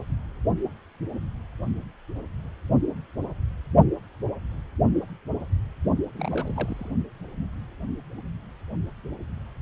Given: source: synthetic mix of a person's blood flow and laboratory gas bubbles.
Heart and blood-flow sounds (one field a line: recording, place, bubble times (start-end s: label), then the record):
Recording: Doppler ultrasound of blood flow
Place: precordium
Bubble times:
6.15-6.92 s: bubbles
From the record:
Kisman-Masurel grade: 211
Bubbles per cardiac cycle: several, 3 to 8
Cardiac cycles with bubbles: 1 to 10%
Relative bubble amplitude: barely perceptible (0.100 to 0.250)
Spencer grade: 1 (occasional bubble signal discernible with the cardiac motion signal, with majority of cardiac periods free of bubbles)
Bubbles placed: only in the low amplitude regions of the cardiac cycle